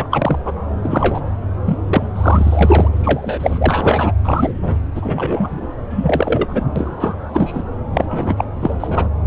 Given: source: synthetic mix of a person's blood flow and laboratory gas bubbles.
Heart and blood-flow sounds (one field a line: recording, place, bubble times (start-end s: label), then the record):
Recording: Doppler ultrasound of blood flow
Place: subclavian vein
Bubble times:
0.00-0.07 s: bubbles
0.11-0.39 s: bubbles
0.45-0.51 s: bubbles
0.82-1.21 s: bubbles
1.66-1.78 s: bubbles
1.88-2.08 s: bubbles
2.15-2.89 s: bubbles
2.96-4.12 s: bubbles
4.24-4.78 s: bubbles
4.95-5.67 s: bubbles
5.89-6.65 s: bubbles
6.75-7.30 s: bubbles
7.33-7.62 s: bubbles
7.93-8.45 s: bubbles
8.62-9.09 s: bubbles
From the record:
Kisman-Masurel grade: 243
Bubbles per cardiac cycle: several, 3 to 8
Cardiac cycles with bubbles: 100%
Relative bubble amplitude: loud (0.450 to 0.775)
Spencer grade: 3 (all of the cardiac periods contain showers or single bubble signals, but not dominating or overriding the cardiac motion signals)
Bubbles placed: anywhere in the cardiac cycle